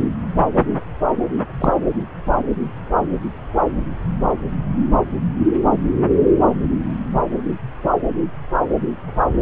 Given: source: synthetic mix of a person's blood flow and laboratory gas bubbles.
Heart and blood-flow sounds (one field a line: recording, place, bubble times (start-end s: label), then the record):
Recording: Doppler ultrasound of blood flow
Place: subclavian vein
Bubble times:
1.58-1.73 s: bubbles
From the record:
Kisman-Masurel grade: 113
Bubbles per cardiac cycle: 1 to 2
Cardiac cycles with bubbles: 1 to 10%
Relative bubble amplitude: loud (0.450 to 0.775)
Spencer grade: 1 (occasional bubble signal discernible with the cardiac motion signal, with majority of cardiac periods free of bubbles)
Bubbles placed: anywhere in the cardiac cycle